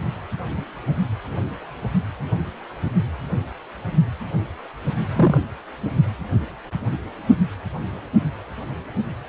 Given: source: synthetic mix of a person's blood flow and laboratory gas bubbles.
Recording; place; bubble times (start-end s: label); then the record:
Doppler ultrasound of blood flow; precordium
5.16-5.42 s: bubbles
From the record:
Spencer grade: 1 (occasional bubble signal discernible with the cardiac motion signal, with majority of cardiac periods free of bubbles); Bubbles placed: only in the low amplitude regions of the cardiac cycle